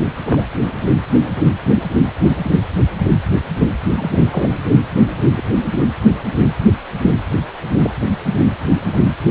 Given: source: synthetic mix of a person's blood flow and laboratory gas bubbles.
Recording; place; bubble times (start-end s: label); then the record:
Doppler ultrasound of blood flow; precordium
0.26-0.41 s: bubbles
2.21-2.37 s: bubbles
3.96-4.10 s: bubbles
4.22-4.55 s: bubbles
5.36-5.43 s: bubbles
7.82-7.92 s: bubbles
From the record:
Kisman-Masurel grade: 122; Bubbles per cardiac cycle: 1 to 2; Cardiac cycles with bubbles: 10 to 50%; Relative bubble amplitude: moderate (0.250 to 0.450); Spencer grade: 2 (many but less than half of the cardiac periods contain bubble signals, singularly or in groups); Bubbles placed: anywhere in the cardiac cycle